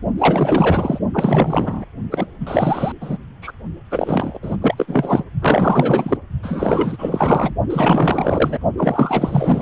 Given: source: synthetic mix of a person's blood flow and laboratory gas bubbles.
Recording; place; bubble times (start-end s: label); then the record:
Doppler ultrasound of blood flow; precordium
0.18-0.99 s: bubbles
1.13-1.84 s: bubbles
2.12-2.27 s: bubbles
2.40-2.92 s: bubbles
3.00-3.17 s: bubbles
3.42-3.52 s: bubbles
3.91-4.38 s: bubbles
4.42-4.57 s: bubbles
4.62-4.75 s: bubbles
4.77-5.24 s: bubbles
5.42-6.17 s: bubbles
6.42-7.55 s: bubbles
7.70-8.58 s: bubbles
8.77-9.62 s: bubbles
From the record:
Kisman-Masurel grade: 444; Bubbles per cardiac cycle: continuous sound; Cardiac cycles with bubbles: 100%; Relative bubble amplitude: maximal (0.775 to 0.999); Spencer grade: 4 (maximum detectable bubble signal sounding continuously throughout systole and diastole of every cardiac period, and overriding the amplitude of the normal cardiac signals); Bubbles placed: only in the low amplitude regions of the cardiac cycle